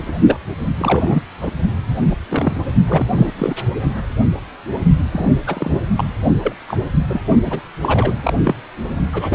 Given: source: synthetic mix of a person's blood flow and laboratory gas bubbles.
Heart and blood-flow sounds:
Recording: Doppler ultrasound of blood flow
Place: precordium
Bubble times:
0.00-0.14 s: bubbles
0.21-0.38 s: bubbles
0.77-1.23 s: bubbles
1.41-1.54 s: bubbles
2.00-2.07 s: bubbles
2.10-2.16 s: bubbles
2.29-2.61 s: bubbles
2.86-3.08 s: bubbles
3.17-3.31 s: bubbles
3.38-3.54 s: bubbles
5.11-5.39 s: bubbles
5.46-5.80 s: bubbles
5.96-6.09 s: bubbles
6.42-6.55 s: bubbles
6.67-6.79 s: bubbles
7.09-7.21 s: bubbles
7.43-7.60 s: bubbles
7.81-8.19 s: bubbles
8.24-8.34 s: bubbles
8.44-8.55 s: bubbles
9.12-9.35 s: bubbles
From the record:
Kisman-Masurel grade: 232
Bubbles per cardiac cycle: several, 3 to 8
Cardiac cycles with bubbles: 50 to 99%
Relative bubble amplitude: moderate (0.250 to 0.450)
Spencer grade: 3 (all of the cardiac periods contain showers or single bubble signals, but not dominating or overriding the cardiac motion signals)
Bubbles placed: only in the low amplitude regions of the cardiac cycle

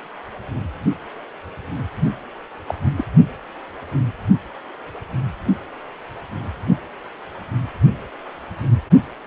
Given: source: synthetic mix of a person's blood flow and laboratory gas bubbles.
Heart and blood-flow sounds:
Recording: Doppler ultrasound of blood flow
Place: precordium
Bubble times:
2.68-2.75 s: bubbles
2.85-2.90 s: bubbles
2.96-3.04 s: bubbles
From the record:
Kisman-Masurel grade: 222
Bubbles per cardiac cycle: several, 3 to 8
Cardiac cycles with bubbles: 10 to 50%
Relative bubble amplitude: moderate (0.250 to 0.450)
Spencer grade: 2 (many but less than half of the cardiac periods contain bubble signals, singularly or in groups)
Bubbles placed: only in the low amplitude regions of the cardiac cycle

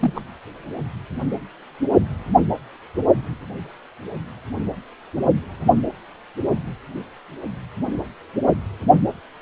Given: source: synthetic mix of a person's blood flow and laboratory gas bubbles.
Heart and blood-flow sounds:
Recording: Doppler ultrasound of blood flow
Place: precordium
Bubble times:
0.01-0.21 s: bubbles
From the record:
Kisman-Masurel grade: 112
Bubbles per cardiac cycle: 1 to 2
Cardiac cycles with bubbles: 1 to 10%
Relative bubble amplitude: moderate (0.250 to 0.450)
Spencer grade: 1 (occasional bubble signal discernible with the cardiac motion signal, with majority of cardiac periods free of bubbles)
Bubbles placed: only in the low amplitude regions of the cardiac cycle

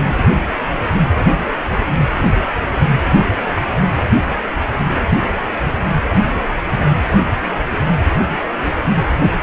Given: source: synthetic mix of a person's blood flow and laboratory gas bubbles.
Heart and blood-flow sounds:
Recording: Doppler ultrasound of blood flow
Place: precordium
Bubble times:
no bubbles
From the record:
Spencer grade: 0 (complete lack of bubble signals)

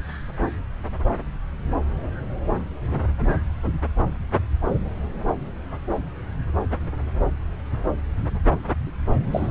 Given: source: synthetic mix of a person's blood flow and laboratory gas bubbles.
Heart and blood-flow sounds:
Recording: Doppler ultrasound of blood flow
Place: subclavian vein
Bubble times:
2.91-3.03 s: bubbles
4.69-4.79 s: bubbles
9.31-9.51 s: bubbles
From the record:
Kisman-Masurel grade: 121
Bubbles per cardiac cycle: 1 to 2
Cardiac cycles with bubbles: 10 to 50%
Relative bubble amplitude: barely perceptible (0.100 to 0.250)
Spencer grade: 2 (many but less than half of the cardiac periods contain bubble signals, singularly or in groups)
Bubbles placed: anywhere in the cardiac cycle

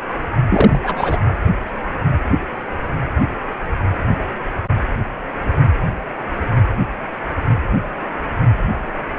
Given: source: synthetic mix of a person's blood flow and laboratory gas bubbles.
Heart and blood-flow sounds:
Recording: Doppler ultrasound of blood flow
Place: precordium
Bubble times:
0.50-0.80 s: bubbles
0.83-1.21 s: bubbles
From the record:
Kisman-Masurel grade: 213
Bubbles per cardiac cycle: several, 3 to 8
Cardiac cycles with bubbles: 1 to 10%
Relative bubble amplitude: loud (0.450 to 0.775)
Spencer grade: 1 (occasional bubble signal discernible with the cardiac motion signal, with majority of cardiac periods free of bubbles)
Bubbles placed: anywhere in the cardiac cycle

